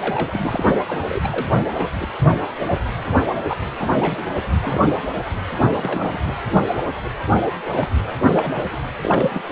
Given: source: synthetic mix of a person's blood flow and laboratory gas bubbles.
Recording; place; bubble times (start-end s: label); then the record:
Doppler ultrasound of blood flow; precordium
0.00-0.79 s: bubbles
0.88-1.00 s: bubbles
1.09-1.21 s: bubbles
1.23-1.49 s: bubbles
1.66-1.70 s: bubbles
1.74-1.88 s: bubbles
2.00-2.08 s: bubbles
2.22-2.35 s: bubbles
2.60-2.79 s: bubbles
3.12-3.22 s: bubbles
3.48-3.57 s: bubbles
3.79-4.25 s: bubbles
4.62-4.98 s: bubbles
5.19-5.30 s: bubbles
5.74-6.21 s: bubbles
6.25-6.33 s: bubbles
6.50-6.65 s: bubbles
6.87-6.92 s: bubbles
7.03-7.10 s: bubbles
7.34-7.41 s: bubbles
7.70-7.88 s: bubbles
8.06-8.13 s: bubbles
8.25-8.69 s: bubbles
8.72-8.77 s: bubbles
9.02-9.42 s: bubbles
From the record:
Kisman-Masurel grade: 242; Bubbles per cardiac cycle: several, 3 to 8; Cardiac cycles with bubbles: 100%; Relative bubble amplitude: moderate (0.250 to 0.450); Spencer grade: 3 (all of the cardiac periods contain showers or single bubble signals, but not dominating or overriding the cardiac motion signals); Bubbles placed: anywhere in the cardiac cycle